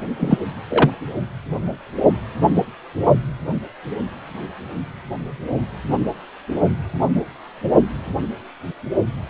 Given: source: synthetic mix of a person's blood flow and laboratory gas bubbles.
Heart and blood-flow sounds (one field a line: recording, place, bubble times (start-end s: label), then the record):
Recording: Doppler ultrasound of blood flow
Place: precordium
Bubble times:
0.20-0.38 s: bubbles
0.69-0.90 s: bubbles
From the record:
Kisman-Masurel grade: 123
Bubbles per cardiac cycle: 1 to 2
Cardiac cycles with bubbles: 10 to 50%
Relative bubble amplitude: loud (0.450 to 0.775)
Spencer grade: 2 (many but less than half of the cardiac periods contain bubble signals, singularly or in groups)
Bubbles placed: only in the low amplitude regions of the cardiac cycle